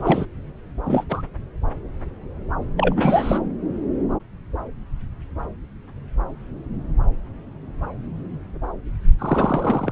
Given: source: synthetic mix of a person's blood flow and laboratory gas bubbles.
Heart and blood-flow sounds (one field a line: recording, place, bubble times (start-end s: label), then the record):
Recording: Doppler ultrasound of blood flow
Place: subclavian vein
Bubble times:
0.00-0.26 s: bubbles
0.86-1.04 s: bubbles
1.08-1.22 s: bubbles
2.77-3.40 s: bubbles
9.19-9.91 s: bubbles
From the record:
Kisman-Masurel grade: 222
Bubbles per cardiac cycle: several, 3 to 8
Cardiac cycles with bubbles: 10 to 50%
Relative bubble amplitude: moderate (0.250 to 0.450)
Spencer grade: 2 (many but less than half of the cardiac periods contain bubble signals, singularly or in groups)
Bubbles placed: anywhere in the cardiac cycle